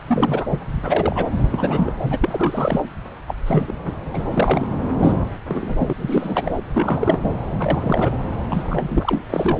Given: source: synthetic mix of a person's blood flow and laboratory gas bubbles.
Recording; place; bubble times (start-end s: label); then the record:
Doppler ultrasound of blood flow; subclavian vein
0.07-0.48 s: bubbles
0.50-0.59 s: bubbles
0.82-1.28 s: bubbles
1.52-1.91 s: bubbles
2.02-2.81 s: bubbles
3.27-3.35 s: bubbles
3.46-3.73 s: bubbles
3.87-3.95 s: bubbles
4.13-4.24 s: bubbles
4.32-4.67 s: bubbles
5.02-5.18 s: bubbles
5.48-5.93 s: bubbles
5.98-6.57 s: bubbles
6.73-7.31 s: bubbles
7.59-8.12 s: bubbles
8.49-9.21 s: bubbles
9.29-9.60 s: bubbles
From the record:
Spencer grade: 3 (all of the cardiac periods contain showers or single bubble signals, but not dominating or overriding the cardiac motion signals); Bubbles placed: anywhere in the cardiac cycle